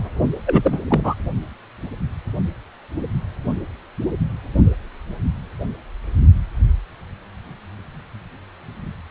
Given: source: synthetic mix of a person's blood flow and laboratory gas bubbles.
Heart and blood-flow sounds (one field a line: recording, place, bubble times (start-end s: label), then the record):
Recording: Doppler ultrasound of blood flow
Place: precordium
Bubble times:
0.46-0.80 s: bubbles
0.89-1.14 s: bubbles
From the record:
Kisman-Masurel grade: 213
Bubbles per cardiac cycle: several, 3 to 8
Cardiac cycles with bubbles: 1 to 10%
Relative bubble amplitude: loud (0.450 to 0.775)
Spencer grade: 1 (occasional bubble signal discernible with the cardiac motion signal, with majority of cardiac periods free of bubbles)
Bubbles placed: only in the low amplitude regions of the cardiac cycle